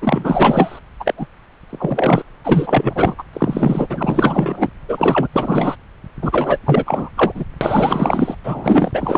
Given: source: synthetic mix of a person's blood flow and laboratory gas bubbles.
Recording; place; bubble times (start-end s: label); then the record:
Doppler ultrasound of blood flow; subclavian vein
0.02-0.79 s: bubbles
0.99-1.14 s: bubbles
1.17-1.27 s: bubbles
1.70-2.23 s: bubbles
2.44-3.15 s: bubbles
3.18-3.23 s: bubbles
3.33-3.86 s: bubbles
3.90-4.67 s: bubbles
4.88-5.27 s: bubbles
5.32-5.76 s: bubbles
6.22-6.58 s: bubbles
6.65-7.09 s: bubbles
7.17-7.44 s: bubbles
7.61-8.35 s: bubbles
8.44-9.18 s: bubbles
From the record:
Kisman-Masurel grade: 444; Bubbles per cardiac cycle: continuous sound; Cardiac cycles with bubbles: 100%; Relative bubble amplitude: maximal (0.775 to 0.999); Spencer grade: 4 (maximum detectable bubble signal sounding continuously throughout systole and diastole of every cardiac period, and overriding the amplitude of the normal cardiac signals); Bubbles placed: anywhere in the cardiac cycle